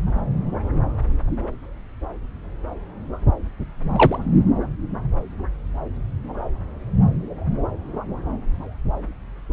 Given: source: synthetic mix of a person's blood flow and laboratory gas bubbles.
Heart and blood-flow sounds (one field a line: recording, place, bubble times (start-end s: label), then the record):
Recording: Doppler ultrasound of blood flow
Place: subclavian vein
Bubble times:
3.96-4.18 s: bubbles
From the record:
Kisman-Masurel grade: 113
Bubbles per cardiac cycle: 1 to 2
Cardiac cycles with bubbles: 1 to 10%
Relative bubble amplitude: loud (0.450 to 0.775)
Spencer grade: 1 (occasional bubble signal discernible with the cardiac motion signal, with majority of cardiac periods free of bubbles)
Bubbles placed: anywhere in the cardiac cycle